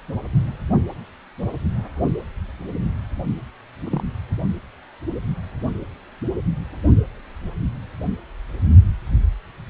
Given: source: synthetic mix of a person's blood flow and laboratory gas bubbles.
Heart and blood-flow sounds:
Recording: Doppler ultrasound of blood flow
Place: precordium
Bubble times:
3.83-4.04 s: bubbles
From the record:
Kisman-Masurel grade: 111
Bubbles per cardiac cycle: 1 to 2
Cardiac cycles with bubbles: 1 to 10%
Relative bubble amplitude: barely perceptible (0.100 to 0.250)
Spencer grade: 1 (occasional bubble signal discernible with the cardiac motion signal, with majority of cardiac periods free of bubbles)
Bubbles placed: only in the low amplitude regions of the cardiac cycle

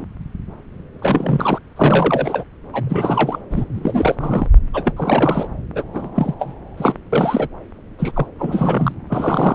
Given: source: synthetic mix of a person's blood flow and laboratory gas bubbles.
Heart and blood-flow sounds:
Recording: Doppler ultrasound of blood flow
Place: subclavian vein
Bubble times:
0.00-0.05 s: bubbles
0.99-1.59 s: bubbles
1.76-2.44 s: bubbles
2.72-3.39 s: bubbles
3.50-3.65 s: bubbles
3.73-4.48 s: bubbles
4.73-4.93 s: bubbles
4.96-5.48 s: bubbles
5.75-5.83 s: bubbles
5.93-6.08 s: bubbles
6.16-6.34 s: bubbles
6.40-6.54 s: bubbles
6.77-6.95 s: bubbles
7.12-7.48 s: bubbles
7.99-8.26 s: bubbles
8.38-8.94 s: bubbles
9.09-9.55 s: bubbles
From the record:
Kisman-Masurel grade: 333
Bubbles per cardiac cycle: rolling drumbeat, 9 or more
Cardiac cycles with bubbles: 50 to 99%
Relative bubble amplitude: loud (0.450 to 0.775)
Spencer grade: 3 (all of the cardiac periods contain showers or single bubble signals, but not dominating or overriding the cardiac motion signals)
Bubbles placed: anywhere in the cardiac cycle

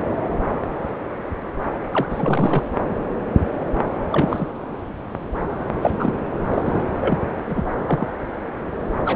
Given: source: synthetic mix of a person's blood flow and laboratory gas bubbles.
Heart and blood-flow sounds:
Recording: Doppler ultrasound of blood flow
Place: subclavian vein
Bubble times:
1.92-2.66 s: bubbles
4.12-4.47 s: bubbles
5.81-6.29 s: bubbles
6.50-6.84 s: bubbles
7.00-7.20 s: bubbles
7.46-7.64 s: bubbles
7.87-8.08 s: bubbles
9.04-9.16 s: bubbles
From the record:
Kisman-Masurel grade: 232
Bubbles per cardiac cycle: several, 3 to 8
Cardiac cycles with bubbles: 50 to 99%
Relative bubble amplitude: moderate (0.250 to 0.450)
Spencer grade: 3 (all of the cardiac periods contain showers or single bubble signals, but not dominating or overriding the cardiac motion signals)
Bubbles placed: anywhere in the cardiac cycle

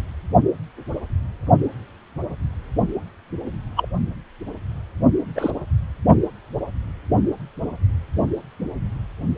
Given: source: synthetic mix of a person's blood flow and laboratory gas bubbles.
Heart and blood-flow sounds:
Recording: Doppler ultrasound of blood flow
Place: precordium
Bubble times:
3.76-3.88 s: bubbles
5.36-5.51 s: bubbles
From the record:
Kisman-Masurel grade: 122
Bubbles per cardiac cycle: 1 to 2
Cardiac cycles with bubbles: 10 to 50%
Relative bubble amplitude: moderate (0.250 to 0.450)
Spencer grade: 2 (many but less than half of the cardiac periods contain bubble signals, singularly or in groups)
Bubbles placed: only in the low amplitude regions of the cardiac cycle

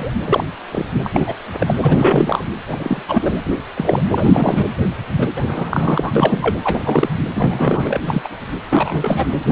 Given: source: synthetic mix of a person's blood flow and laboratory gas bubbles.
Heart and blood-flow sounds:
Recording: Doppler ultrasound of blood flow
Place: precordium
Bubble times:
0.00-0.13 s: bubbles
0.27-0.44 s: bubbles
0.72-0.85 s: bubbles
1.04-1.35 s: bubbles
1.58-1.75 s: bubbles
1.82-2.42 s: bubbles
2.68-3.02 s: bubbles
3.08-3.41 s: bubbles
3.45-3.54 s: bubbles
3.76-4.03 s: bubbles
4.11-4.71 s: bubbles
5.19-5.26 s: bubbles
5.37-5.43 s: bubbles
5.47-6.12 s: bubbles
6.15-7.09 s: bubbles
7.35-7.99 s: bubbles
8.06-8.28 s: bubbles
8.70-9.28 s: bubbles
9.46-9.52 s: bubbles
From the record:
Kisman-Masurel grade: 243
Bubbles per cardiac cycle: several, 3 to 8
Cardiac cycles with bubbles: 100%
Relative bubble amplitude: loud (0.450 to 0.775)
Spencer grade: 3 (all of the cardiac periods contain showers or single bubble signals, but not dominating or overriding the cardiac motion signals)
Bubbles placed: anywhere in the cardiac cycle

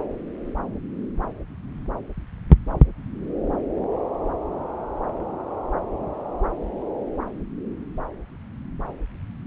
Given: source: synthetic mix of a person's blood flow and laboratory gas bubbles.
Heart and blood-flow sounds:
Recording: Doppler ultrasound of blood flow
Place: subclavian vein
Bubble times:
no bubbles
From the record:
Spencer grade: 0 (complete lack of bubble signals)

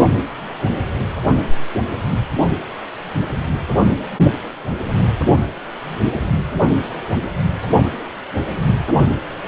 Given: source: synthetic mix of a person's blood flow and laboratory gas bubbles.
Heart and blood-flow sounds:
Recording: Doppler ultrasound of blood flow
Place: precordium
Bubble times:
4.83-4.91 s: bubbles
From the record:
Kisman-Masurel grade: 111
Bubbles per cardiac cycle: 1 to 2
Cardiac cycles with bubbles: 1 to 10%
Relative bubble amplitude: barely perceptible (0.100 to 0.250)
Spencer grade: 1 (occasional bubble signal discernible with the cardiac motion signal, with majority of cardiac periods free of bubbles)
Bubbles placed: only in the low amplitude regions of the cardiac cycle

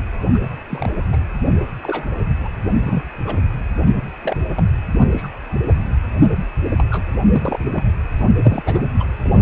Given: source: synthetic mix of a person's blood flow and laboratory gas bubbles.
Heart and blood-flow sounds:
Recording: Doppler ultrasound of blood flow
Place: precordium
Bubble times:
0.34-0.38 s: bubbles
0.41-0.50 s: bubbles
0.69-0.93 s: bubbles
1.12-1.18 s: bubbles
1.83-2.08 s: bubbles
2.44-2.47 s: bubbles
2.80-3.02 s: bubbles
3.25-3.41 s: bubbles
4.22-4.43 s: bubbles
4.56-4.66 s: bubbles
5.11-5.29 s: bubbles
5.64-5.73 s: bubbles
6.76-6.85 s: bubbles
6.91-7.04 s: bubbles
7.12-7.16 s: bubbles
7.33-7.58 s: bubbles
7.73-7.83 s: bubbles
8.20-8.29 s: bubbles
8.44-8.62 s: bubbles
8.66-8.82 s: bubbles
9.00-9.04 s: bubbles
9.23-9.42 s: bubbles
From the record:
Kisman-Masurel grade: 232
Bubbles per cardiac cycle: several, 3 to 8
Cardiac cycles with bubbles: 50 to 99%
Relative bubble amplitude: moderate (0.250 to 0.450)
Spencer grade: 3 (all of the cardiac periods contain showers or single bubble signals, but not dominating or overriding the cardiac motion signals)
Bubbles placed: anywhere in the cardiac cycle

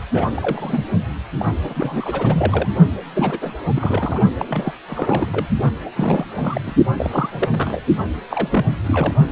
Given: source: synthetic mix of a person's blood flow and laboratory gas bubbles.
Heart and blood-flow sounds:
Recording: Doppler ultrasound of blood flow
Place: precordium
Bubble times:
0.00-0.03 s: bubbles
0.13-0.27 s: bubbles
0.35-0.85 s: bubbles
1.38-1.46 s: bubbles
1.63-2.70 s: bubbles
3.14-3.54 s: bubbles
3.75-4.21 s: bubbles
4.39-4.46 s: bubbles
4.49-4.77 s: bubbles
4.88-5.27 s: bubbles
5.32-5.47 s: bubbles
5.85-5.90 s: bubbles
5.96-6.25 s: bubbles
6.40-6.61 s: bubbles
6.66-6.75 s: bubbles
6.96-7.29 s: bubbles
7.32-7.49 s: bubbles
7.51-7.80 s: bubbles
8.30-8.65 s: bubbles
8.84-9.13 s: bubbles
From the record:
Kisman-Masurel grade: 332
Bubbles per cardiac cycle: rolling drumbeat, 9 or more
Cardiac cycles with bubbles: 50 to 99%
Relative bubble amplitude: moderate (0.250 to 0.450)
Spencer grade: 3 (all of the cardiac periods contain showers or single bubble signals, but not dominating or overriding the cardiac motion signals)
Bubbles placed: only in the low amplitude regions of the cardiac cycle

